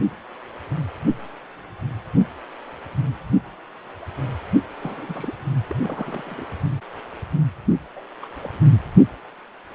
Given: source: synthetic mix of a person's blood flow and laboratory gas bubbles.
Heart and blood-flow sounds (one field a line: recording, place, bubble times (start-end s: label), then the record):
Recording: Doppler ultrasound of blood flow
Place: precordium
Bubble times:
4.79-5.34 s: bubbles
5.67-5.77 s: bubbles
5.83-6.45 s: bubbles
7.96-8.01 s: bubbles
8.21-8.28 s: bubbles
8.43-8.52 s: bubbles
From the record:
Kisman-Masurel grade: 221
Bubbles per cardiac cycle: several, 3 to 8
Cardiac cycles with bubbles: 10 to 50%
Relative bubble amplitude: barely perceptible (0.100 to 0.250)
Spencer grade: 2 (many but less than half of the cardiac periods contain bubble signals, singularly or in groups)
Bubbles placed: only in the low amplitude regions of the cardiac cycle